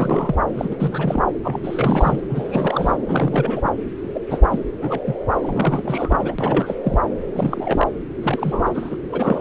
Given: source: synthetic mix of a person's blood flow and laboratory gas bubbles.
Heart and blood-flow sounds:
Doppler ultrasound of blood flow; subclavian vein
0.00-0.35 s: bubbles
0.53-0.77 s: bubbles
0.80-1.24 s: bubbles
1.43-2.20 s: bubbles
2.29-2.98 s: bubbles
3.07-3.72 s: bubbles
4.14-4.20 s: bubbles
4.29-4.42 s: bubbles
4.51-4.59 s: bubbles
4.81-5.01 s: bubbles
5.05-5.15 s: bubbles
5.34-6.74 s: bubbles
6.82-6.98 s: bubbles
7.33-7.88 s: bubbles
8.22-8.70 s: bubbles
8.74-8.97 s: bubbles
9.12-9.41 s: bubbles
From the record:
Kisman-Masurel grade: 342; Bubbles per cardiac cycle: rolling drumbeat, 9 or more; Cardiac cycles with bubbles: 100%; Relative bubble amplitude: moderate (0.250 to 0.450); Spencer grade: 3 (all of the cardiac periods contain showers or single bubble signals, but not dominating or overriding the cardiac motion signals); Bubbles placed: anywhere in the cardiac cycle

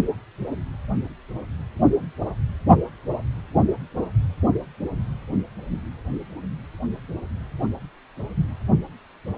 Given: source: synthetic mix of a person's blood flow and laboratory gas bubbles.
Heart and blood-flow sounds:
Doppler ultrasound of blood flow; precordium
no bubbles
From the record:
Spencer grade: 0 (complete lack of bubble signals)

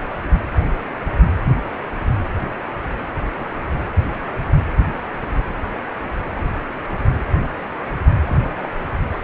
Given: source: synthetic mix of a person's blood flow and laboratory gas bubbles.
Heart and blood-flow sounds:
Doppler ultrasound of blood flow; precordium
2.40-2.49 s: bubbles
8.27-8.69 s: bubbles
From the record:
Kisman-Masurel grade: 121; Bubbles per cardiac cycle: 1 to 2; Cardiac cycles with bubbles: 10 to 50%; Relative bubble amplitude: barely perceptible (0.100 to 0.250); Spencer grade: 2 (many but less than half of the cardiac periods contain bubble signals, singularly or in groups); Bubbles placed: anywhere in the cardiac cycle

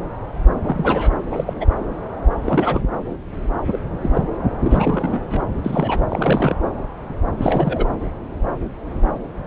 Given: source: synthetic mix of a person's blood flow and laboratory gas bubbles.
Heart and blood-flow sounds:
Doppler ultrasound of blood flow; subclavian vein
0.64-1.11 s: bubbles
1.25-1.67 s: bubbles
2.43-2.81 s: bubbles
3.72-3.79 s: bubbles
4.01-4.10 s: bubbles
4.13-4.21 s: bubbles
4.62-5.45 s: bubbles
5.57-5.61 s: bubbles
5.63-6.00 s: bubbles
6.08-6.57 s: bubbles
7.38-7.85 s: bubbles
From the record:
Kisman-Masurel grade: 232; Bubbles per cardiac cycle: several, 3 to 8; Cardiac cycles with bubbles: 50 to 99%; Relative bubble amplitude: moderate (0.250 to 0.450); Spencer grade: 3 (all of the cardiac periods contain showers or single bubble signals, but not dominating or overriding the cardiac motion signals); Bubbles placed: anywhere in the cardiac cycle

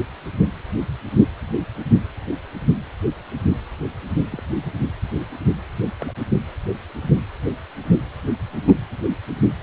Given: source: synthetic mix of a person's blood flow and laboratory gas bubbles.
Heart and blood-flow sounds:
Doppler ultrasound of blood flow; precordium
4.32-4.41 s: bubbles
6.00-6.06 s: bubbles
6.08-6.12 s: bubbles
8.67-8.72 s: bubbles
9.03-9.08 s: bubbles
From the record:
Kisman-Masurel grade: 121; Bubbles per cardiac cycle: 1 to 2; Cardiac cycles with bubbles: 10 to 50%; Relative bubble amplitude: barely perceptible (0.100 to 0.250); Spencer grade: 2 (many but less than half of the cardiac periods contain bubble signals, singularly or in groups); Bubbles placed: anywhere in the cardiac cycle

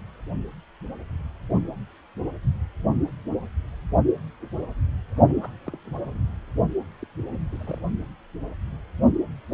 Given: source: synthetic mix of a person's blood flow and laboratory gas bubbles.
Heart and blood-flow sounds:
Doppler ultrasound of blood flow; precordium
5.27-5.53 s: bubbles
5.64-5.78 s: bubbles
5.85-6.18 s: bubbles
6.23-6.35 s: bubbles
7.01-7.06 s: bubbles
7.50-7.80 s: bubbles
From the record:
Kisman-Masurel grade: 221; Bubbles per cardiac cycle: several, 3 to 8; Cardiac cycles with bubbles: 10 to 50%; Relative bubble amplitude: barely perceptible (0.100 to 0.250); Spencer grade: 2 (many but less than half of the cardiac periods contain bubble signals, singularly or in groups); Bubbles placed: only in the low amplitude regions of the cardiac cycle

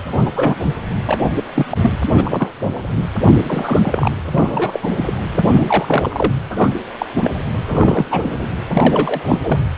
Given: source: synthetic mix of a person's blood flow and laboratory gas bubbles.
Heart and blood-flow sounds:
Doppler ultrasound of blood flow; precordium
0.18-0.30 s: bubbles
0.34-0.76 s: bubbles
1.06-1.17 s: bubbles
1.35-1.44 s: bubbles
1.56-1.66 s: bubbles
1.69-1.77 s: bubbles
1.81-1.90 s: bubbles
2.13-2.54 s: bubbles
3.24-3.34 s: bubbles
3.46-4.12 s: bubbles
4.31-4.80 s: bubbles
4.83-4.88 s: bubbles
4.96-5.13 s: bubbles
5.32-6.33 s: bubbles
6.57-6.70 s: bubbles
6.98-7.06 s: bubbles
7.23-7.31 s: bubbles
7.68-8.05 s: bubbles
8.10-8.47 s: bubbles
8.73-9.60 s: bubbles
From the record:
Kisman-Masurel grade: 242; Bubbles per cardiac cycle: several, 3 to 8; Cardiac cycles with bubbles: 100%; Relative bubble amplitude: moderate (0.250 to 0.450); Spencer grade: 3 (all of the cardiac periods contain showers or single bubble signals, but not dominating or overriding the cardiac motion signals); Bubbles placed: anywhere in the cardiac cycle

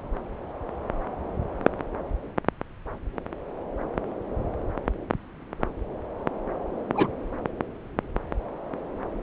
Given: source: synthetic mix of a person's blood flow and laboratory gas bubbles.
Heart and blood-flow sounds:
Doppler ultrasound of blood flow; subclavian vein
6.95-7.08 s: bubbles
From the record:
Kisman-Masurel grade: 122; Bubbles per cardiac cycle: 1 to 2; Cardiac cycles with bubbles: 10 to 50%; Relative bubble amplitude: moderate (0.250 to 0.450); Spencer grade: 2 (many but less than half of the cardiac periods contain bubble signals, singularly or in groups); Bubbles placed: anywhere in the cardiac cycle

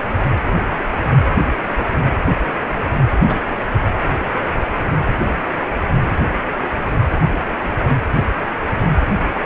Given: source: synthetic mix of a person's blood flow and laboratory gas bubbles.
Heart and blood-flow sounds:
Doppler ultrasound of blood flow; precordium
3.25-3.40 s: bubbles
From the record:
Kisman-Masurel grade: 123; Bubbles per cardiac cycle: 1 to 2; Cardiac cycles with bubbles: 10 to 50%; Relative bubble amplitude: loud (0.450 to 0.775); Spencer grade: 2 (many but less than half of the cardiac periods contain bubble signals, singularly or in groups); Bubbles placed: anywhere in the cardiac cycle

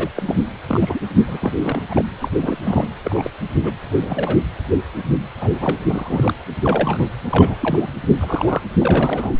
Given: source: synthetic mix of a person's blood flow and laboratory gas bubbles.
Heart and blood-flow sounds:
Doppler ultrasound of blood flow; precordium
0.00-0.10 s: bubbles
0.16-0.40 s: bubbles
0.68-0.99 s: bubbles
1.28-1.38 s: bubbles
1.41-1.53 s: bubbles
1.62-1.83 s: bubbles
1.89-2.04 s: bubbles
2.19-2.28 s: bubbles
2.42-2.58 s: bubbles
2.61-2.87 s: bubbles
3.03-3.30 s: bubbles
3.61-3.72 s: bubbles
3.83-4.39 s: bubbles
5.41-5.53 s: bubbles
5.59-5.77 s: bubbles
5.90-6.33 s: bubbles
6.62-7.06 s: bubbles
7.29-7.91 s: bubbles
8.19-8.61 s: bubbles
8.80-9.33 s: bubbles
From the record:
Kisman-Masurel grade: 242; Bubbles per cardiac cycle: several, 3 to 8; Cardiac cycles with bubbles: 100%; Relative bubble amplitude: moderate (0.250 to 0.450); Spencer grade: 3 (all of the cardiac periods contain showers or single bubble signals, but not dominating or overriding the cardiac motion signals); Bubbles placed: anywhere in the cardiac cycle

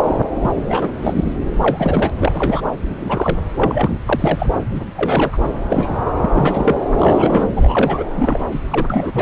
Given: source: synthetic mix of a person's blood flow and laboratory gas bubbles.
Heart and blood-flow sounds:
Doppler ultrasound of blood flow; subclavian vein
0.04-0.53 s: bubbles
0.69-0.88 s: bubbles
1.00-1.32 s: bubbles
1.61-2.12 s: bubbles
2.19-2.62 s: bubbles
2.89-3.38 s: bubbles
3.57-3.98 s: bubbles
4.05-4.47 s: bubbles
4.74-4.81 s: bubbles
4.96-5.37 s: bubbles
5.70-5.98 s: bubbles
6.21-6.29 s: bubbles
6.34-6.76 s: bubbles
6.98-7.46 s: bubbles
7.55-8.04 s: bubbles
8.16-8.39 s: bubbles
8.52-8.59 s: bubbles
8.71-8.86 s: bubbles
8.89-9.22 s: bubbles
From the record:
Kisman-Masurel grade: 242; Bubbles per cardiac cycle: several, 3 to 8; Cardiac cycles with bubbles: 100%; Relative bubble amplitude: moderate (0.250 to 0.450); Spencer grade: 3 (all of the cardiac periods contain showers or single bubble signals, but not dominating or overriding the cardiac motion signals); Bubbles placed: anywhere in the cardiac cycle

